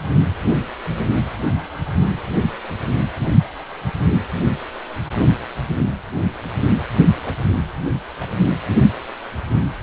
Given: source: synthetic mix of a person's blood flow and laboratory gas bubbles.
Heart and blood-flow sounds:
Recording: Doppler ultrasound of blood flow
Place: precordium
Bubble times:
5.72-5.86 s: bubbles
7.17-7.37 s: bubbles
8.19-8.29 s: bubbles
From the record:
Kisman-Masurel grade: 121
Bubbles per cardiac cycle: 1 to 2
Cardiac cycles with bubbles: 10 to 50%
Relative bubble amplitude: barely perceptible (0.100 to 0.250)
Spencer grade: 2 (many but less than half of the cardiac periods contain bubble signals, singularly or in groups)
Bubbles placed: anywhere in the cardiac cycle

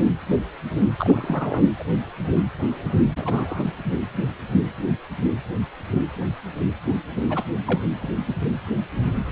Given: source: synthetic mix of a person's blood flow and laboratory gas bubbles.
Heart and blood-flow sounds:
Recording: Doppler ultrasound of blood flow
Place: precordium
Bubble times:
0.98-1.61 s: bubbles
1.79-1.83 s: bubbles
3.17-3.63 s: bubbles
7.29-7.43 s: bubbles
7.65-7.83 s: bubbles
8.00-8.08 s: bubbles
From the record:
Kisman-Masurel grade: 222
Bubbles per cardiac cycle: several, 3 to 8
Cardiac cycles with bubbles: 10 to 50%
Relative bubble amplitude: moderate (0.250 to 0.450)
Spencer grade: 2 (many but less than half of the cardiac periods contain bubble signals, singularly or in groups)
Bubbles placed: anywhere in the cardiac cycle

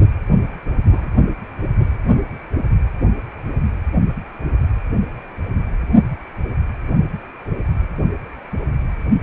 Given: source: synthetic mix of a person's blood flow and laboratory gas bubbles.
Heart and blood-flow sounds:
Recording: Doppler ultrasound of blood flow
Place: precordium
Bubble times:
0.91-1.08 s: bubbles
From the record:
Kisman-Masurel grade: 112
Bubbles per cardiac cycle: 1 to 2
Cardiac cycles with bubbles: 1 to 10%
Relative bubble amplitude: moderate (0.250 to 0.450)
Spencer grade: 1 (occasional bubble signal discernible with the cardiac motion signal, with majority of cardiac periods free of bubbles)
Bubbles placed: only in the low amplitude regions of the cardiac cycle

